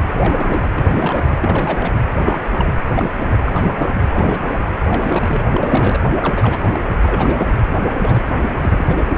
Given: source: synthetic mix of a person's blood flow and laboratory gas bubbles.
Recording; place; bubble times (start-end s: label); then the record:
Doppler ultrasound of blood flow; precordium
0.10-0.72 s: bubbles
0.76-1.37 s: bubbles
1.42-1.93 s: bubbles
2.21-2.74 s: bubbles
2.92-3.10 s: bubbles
3.20-3.38 s: bubbles
3.45-3.91 s: bubbles
3.94-4.01 s: bubbles
4.12-4.63 s: bubbles
4.88-5.45 s: bubbles
5.49-6.01 s: bubbles
6.21-6.79 s: bubbles
7.02-7.53 s: bubbles
7.57-7.83 s: bubbles
8.02-8.27 s: bubbles
8.37-9.05 s: bubbles
9.10-9.18 s: bubbles
From the record:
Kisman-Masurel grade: 342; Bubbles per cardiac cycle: rolling drumbeat, 9 or more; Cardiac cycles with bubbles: 100%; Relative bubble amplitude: moderate (0.250 to 0.450); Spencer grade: 3 (all of the cardiac periods contain showers or single bubble signals, but not dominating or overriding the cardiac motion signals); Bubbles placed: anywhere in the cardiac cycle